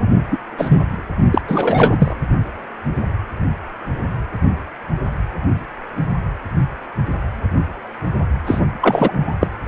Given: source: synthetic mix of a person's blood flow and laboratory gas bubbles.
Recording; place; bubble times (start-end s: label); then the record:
Doppler ultrasound of blood flow; precordium
0.31-0.39 s: bubbles
0.58-0.83 s: bubbles
1.30-1.41 s: bubbles
1.47-2.15 s: bubbles
8.46-8.61 s: bubbles
8.81-9.34 s: bubbles
9.40-9.47 s: bubbles
From the record:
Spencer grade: 2 (many but less than half of the cardiac periods contain bubble signals, singularly or in groups); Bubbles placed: anywhere in the cardiac cycle